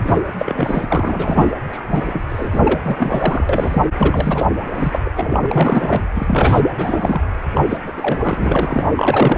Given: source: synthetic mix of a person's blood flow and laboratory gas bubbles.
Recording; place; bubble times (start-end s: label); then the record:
Doppler ultrasound of blood flow; precordium
0.00-0.21 s: bubbles
0.38-1.52 s: bubbles
1.72-1.82 s: bubbles
1.91-2.25 s: bubbles
2.29-2.62 s: bubbles
2.65-2.80 s: bubbles
2.84-3.88 s: bubbles
3.97-4.46 s: bubbles
4.75-4.99 s: bubbles
5.04-5.10 s: bubbles
5.16-6.05 s: bubbles
6.14-6.62 s: bubbles
6.77-7.21 s: bubbles
7.54-7.60 s: bubbles
7.69-7.77 s: bubbles
7.86-7.92 s: bubbles
7.97-8.88 s: bubbles
8.96-9.38 s: bubbles
From the record:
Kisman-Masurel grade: 342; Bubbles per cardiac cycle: rolling drumbeat, 9 or more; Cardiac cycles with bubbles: 100%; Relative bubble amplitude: moderate (0.250 to 0.450); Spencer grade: 3 (all of the cardiac periods contain showers or single bubble signals, but not dominating or overriding the cardiac motion signals); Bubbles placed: anywhere in the cardiac cycle